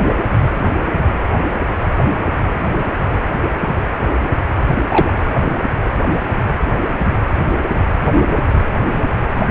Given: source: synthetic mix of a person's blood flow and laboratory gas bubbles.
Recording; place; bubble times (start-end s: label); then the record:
Doppler ultrasound of blood flow; precordium
4.88-5.13 s: bubbles
From the record:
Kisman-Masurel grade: 112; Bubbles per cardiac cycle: 1 to 2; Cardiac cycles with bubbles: 1 to 10%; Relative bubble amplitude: moderate (0.250 to 0.450); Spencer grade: 1 (occasional bubble signal discernible with the cardiac motion signal, with majority of cardiac periods free of bubbles); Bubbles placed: anywhere in the cardiac cycle